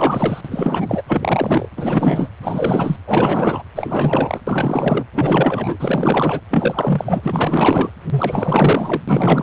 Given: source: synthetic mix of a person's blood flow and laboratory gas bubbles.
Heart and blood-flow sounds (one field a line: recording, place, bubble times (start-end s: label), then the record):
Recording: Doppler ultrasound of blood flow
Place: precordium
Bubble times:
0.00-0.41 s: bubbles
0.45-1.03 s: bubbles
1.08-1.68 s: bubbles
1.76-2.29 s: bubbles
2.42-2.96 s: bubbles
3.05-3.62 s: bubbles
3.75-4.40 s: bubbles
4.47-5.04 s: bubbles
5.14-5.77 s: bubbles
5.79-6.41 s: bubbles
6.50-7.90 s: bubbles
8.09-9.01 s: bubbles
9.07-9.43 s: bubbles
From the record:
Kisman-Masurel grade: 444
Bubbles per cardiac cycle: continuous sound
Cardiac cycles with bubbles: 100%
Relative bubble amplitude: maximal (0.775 to 0.999)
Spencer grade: 4 (maximum detectable bubble signal sounding continuously throughout systole and diastole of every cardiac period, and overriding the amplitude of the normal cardiac signals)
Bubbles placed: anywhere in the cardiac cycle